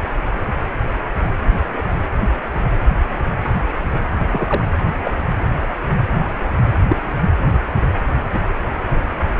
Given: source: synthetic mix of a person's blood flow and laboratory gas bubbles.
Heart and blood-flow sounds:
Doppler ultrasound of blood flow; precordium
4.29-4.65 s: bubbles
5.04-5.11 s: bubbles
6.88-6.96 s: bubbles
From the record:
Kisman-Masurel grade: 123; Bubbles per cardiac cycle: 1 to 2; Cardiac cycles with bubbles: 10 to 50%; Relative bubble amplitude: loud (0.450 to 0.775); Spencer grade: 2 (many but less than half of the cardiac periods contain bubble signals, singularly or in groups); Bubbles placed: anywhere in the cardiac cycle

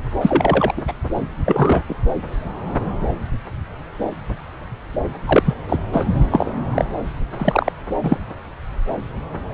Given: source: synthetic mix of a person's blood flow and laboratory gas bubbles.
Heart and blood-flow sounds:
Doppler ultrasound of blood flow; subclavian vein
0.21-0.73 s: bubbles
0.76-0.82 s: bubbles
0.88-0.93 s: bubbles
1.46-1.82 s: bubbles
1.89-1.96 s: bubbles
5.25-5.55 s: bubbles
5.68-5.79 s: bubbles
5.92-6.05 s: bubbles
6.31-6.54 s: bubbles
6.74-6.85 s: bubbles
7.39-7.72 s: bubbles
8.03-8.18 s: bubbles
From the record:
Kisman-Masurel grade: 233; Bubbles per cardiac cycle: several, 3 to 8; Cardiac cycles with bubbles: 50 to 99%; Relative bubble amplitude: loud (0.450 to 0.775); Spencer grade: 3 (all of the cardiac periods contain showers or single bubble signals, but not dominating or overriding the cardiac motion signals); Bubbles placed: anywhere in the cardiac cycle

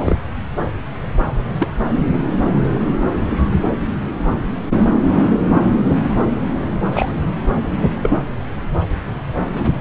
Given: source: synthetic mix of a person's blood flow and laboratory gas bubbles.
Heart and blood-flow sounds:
Doppler ultrasound of blood flow; subclavian vein
0.00-0.17 s: bubbles
1.59-1.69 s: bubbles
6.92-7.12 s: bubbles
8.03-8.19 s: bubbles
9.52-9.71 s: bubbles
From the record:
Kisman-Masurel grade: 122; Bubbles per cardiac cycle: 1 to 2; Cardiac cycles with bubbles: 10 to 50%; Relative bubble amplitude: moderate (0.250 to 0.450); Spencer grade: 2 (many but less than half of the cardiac periods contain bubble signals, singularly or in groups); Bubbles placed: anywhere in the cardiac cycle

